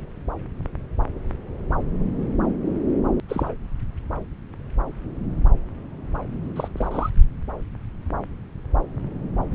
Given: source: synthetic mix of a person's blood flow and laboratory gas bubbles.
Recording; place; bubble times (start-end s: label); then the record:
Doppler ultrasound of blood flow; subclavian vein
3.29-3.52 s: bubbles
6.55-6.68 s: bubbles
6.76-7.10 s: bubbles
From the record:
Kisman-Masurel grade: 221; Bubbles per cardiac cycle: several, 3 to 8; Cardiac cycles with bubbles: 10 to 50%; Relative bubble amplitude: barely perceptible (0.100 to 0.250); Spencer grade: 2 (many but less than half of the cardiac periods contain bubble signals, singularly or in groups); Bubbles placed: anywhere in the cardiac cycle